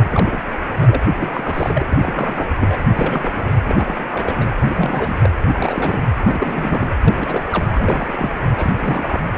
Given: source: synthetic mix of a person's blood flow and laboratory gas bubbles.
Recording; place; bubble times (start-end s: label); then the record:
Doppler ultrasound of blood flow; precordium
0.00-0.42 s: bubbles
0.72-1.02 s: bubbles
1.16-1.86 s: bubbles
1.88-2.48 s: bubbles
2.55-2.77 s: bubbles
2.96-3.53 s: bubbles
3.67-4.08 s: bubbles
4.12-4.47 s: bubbles
4.56-5.30 s: bubbles
5.47-6.03 s: bubbles
6.22-6.89 s: bubbles
7.01-7.43 s: bubbles
7.49-7.66 s: bubbles
7.75-8.37 s: bubbles
8.56-9.20 s: bubbles
9.23-9.28 s: bubbles
From the record:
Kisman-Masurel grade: 342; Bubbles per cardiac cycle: rolling drumbeat, 9 or more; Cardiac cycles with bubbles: 100%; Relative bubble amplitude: moderate (0.250 to 0.450); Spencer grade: 3 (all of the cardiac periods contain showers or single bubble signals, but not dominating or overriding the cardiac motion signals); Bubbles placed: anywhere in the cardiac cycle